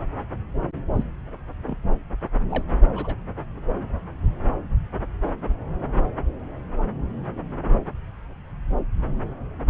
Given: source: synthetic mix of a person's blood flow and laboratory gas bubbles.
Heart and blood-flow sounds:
Doppler ultrasound of blood flow; subclavian vein
0.93-1.04 s: bubbles
1.62-1.76 s: bubbles
2.50-2.63 s: bubbles
2.95-3.15 s: bubbles
From the record:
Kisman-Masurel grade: 111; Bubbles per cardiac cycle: 1 to 2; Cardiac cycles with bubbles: 1 to 10%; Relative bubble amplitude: barely perceptible (0.100 to 0.250); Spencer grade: 1 (occasional bubble signal discernible with the cardiac motion signal, with majority of cardiac periods free of bubbles); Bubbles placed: anywhere in the cardiac cycle

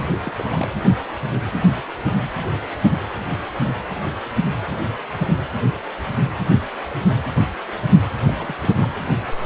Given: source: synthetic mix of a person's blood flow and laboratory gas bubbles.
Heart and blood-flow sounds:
Doppler ultrasound of blood flow; precordium
0.00-0.06 s: bubbles
0.23-0.67 s: bubbles
8.21-8.33 s: bubbles
8.38-8.54 s: bubbles
8.56-8.69 s: bubbles
8.81-8.88 s: bubbles
From the record:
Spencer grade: 2 (many but less than half of the cardiac periods contain bubble signals, singularly or in groups); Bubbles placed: anywhere in the cardiac cycle

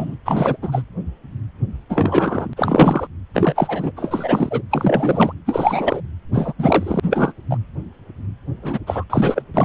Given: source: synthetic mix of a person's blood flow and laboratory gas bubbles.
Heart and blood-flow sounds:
Doppler ultrasound of blood flow; precordium
0.00-0.16 s: bubbles
0.25-0.56 s: bubbles
0.62-0.82 s: bubbles
1.89-2.54 s: bubbles
2.56-3.07 s: bubbles
3.33-3.91 s: bubbles
3.96-4.62 s: bubbles
4.71-5.33 s: bubbles
5.46-6.01 s: bubbles
6.33-6.53 s: bubbles
6.58-7.00 s: bubbles
7.03-7.33 s: bubbles
7.50-7.58 s: bubbles
8.62-8.79 s: bubbles
8.87-9.04 s: bubbles
9.10-9.42 s: bubbles
9.54-9.65 s: bubbles
From the record:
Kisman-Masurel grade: 333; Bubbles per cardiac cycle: rolling drumbeat, 9 or more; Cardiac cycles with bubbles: 50 to 99%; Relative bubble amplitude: loud (0.450 to 0.775); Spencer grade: 3 (all of the cardiac periods contain showers or single bubble signals, but not dominating or overriding the cardiac motion signals); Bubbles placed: anywhere in the cardiac cycle

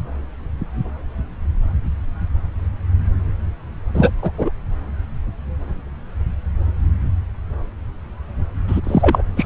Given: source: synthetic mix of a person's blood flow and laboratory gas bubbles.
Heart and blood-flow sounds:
Doppler ultrasound of blood flow; subclavian vein
3.94-4.10 s: bubbles
4.21-4.31 s: bubbles
4.38-4.51 s: bubbles
8.67-8.81 s: bubbles
8.84-9.23 s: bubbles
9.36-9.46 s: bubbles
From the record:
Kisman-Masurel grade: 223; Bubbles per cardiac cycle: several, 3 to 8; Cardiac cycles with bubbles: 10 to 50%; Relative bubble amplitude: loud (0.450 to 0.775); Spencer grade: 2 (many but less than half of the cardiac periods contain bubble signals, singularly or in groups); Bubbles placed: anywhere in the cardiac cycle

